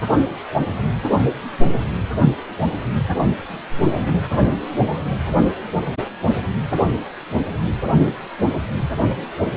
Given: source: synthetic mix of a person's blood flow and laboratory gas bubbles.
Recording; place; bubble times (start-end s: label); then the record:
Doppler ultrasound of blood flow; precordium
3.48-3.62 s: bubbles
3.86-4.12 s: bubbles
4.15-4.20 s: bubbles
From the record:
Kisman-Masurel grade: 211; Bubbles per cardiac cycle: several, 3 to 8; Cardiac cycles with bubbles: 1 to 10%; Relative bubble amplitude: barely perceptible (0.100 to 0.250); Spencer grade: 1 (occasional bubble signal discernible with the cardiac motion signal, with majority of cardiac periods free of bubbles); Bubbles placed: only in the low amplitude regions of the cardiac cycle